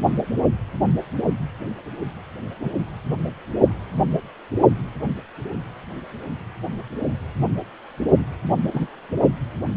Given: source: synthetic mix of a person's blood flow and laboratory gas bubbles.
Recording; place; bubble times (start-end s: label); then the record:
Doppler ultrasound of blood flow; precordium
2.60-2.72 s: bubbles
8.73-8.87 s: bubbles
From the record:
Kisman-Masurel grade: 122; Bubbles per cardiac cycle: 1 to 2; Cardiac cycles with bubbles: 10 to 50%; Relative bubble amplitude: moderate (0.250 to 0.450); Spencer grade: 2 (many but less than half of the cardiac periods contain bubble signals, singularly or in groups); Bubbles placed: only in the low amplitude regions of the cardiac cycle